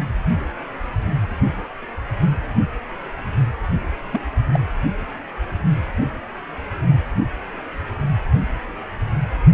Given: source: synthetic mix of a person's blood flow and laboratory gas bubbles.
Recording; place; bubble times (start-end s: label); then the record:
Doppler ultrasound of blood flow; precordium
4.12-4.21 s: bubbles
4.51-4.59 s: bubbles
From the record:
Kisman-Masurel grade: 112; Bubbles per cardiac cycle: 1 to 2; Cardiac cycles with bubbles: 1 to 10%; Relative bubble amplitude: moderate (0.250 to 0.450); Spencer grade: 1 (occasional bubble signal discernible with the cardiac motion signal, with majority of cardiac periods free of bubbles); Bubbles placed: anywhere in the cardiac cycle